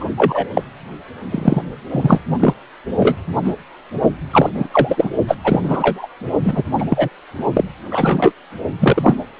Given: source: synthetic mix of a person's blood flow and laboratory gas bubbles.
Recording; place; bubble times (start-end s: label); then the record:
Doppler ultrasound of blood flow; precordium
0.00-0.06 s: bubbles
0.17-0.45 s: bubbles
0.53-0.63 s: bubbles
1.31-1.62 s: bubbles
1.90-2.20 s: bubbles
2.40-2.54 s: bubbles
2.99-3.16 s: bubbles
3.45-3.54 s: bubbles
4.32-4.50 s: bubbles
4.54-4.67 s: bubbles
4.71-5.09 s: bubbles
5.28-5.37 s: bubbles
5.44-6.07 s: bubbles
6.44-6.63 s: bubbles
6.78-6.85 s: bubbles
6.90-7.09 s: bubbles
7.53-7.64 s: bubbles
7.89-8.32 s: bubbles
8.80-9.15 s: bubbles
From the record:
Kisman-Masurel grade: 243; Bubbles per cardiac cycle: several, 3 to 8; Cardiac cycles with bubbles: 100%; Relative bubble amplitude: loud (0.450 to 0.775); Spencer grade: 3 (all of the cardiac periods contain showers or single bubble signals, but not dominating or overriding the cardiac motion signals); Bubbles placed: only in the low amplitude regions of the cardiac cycle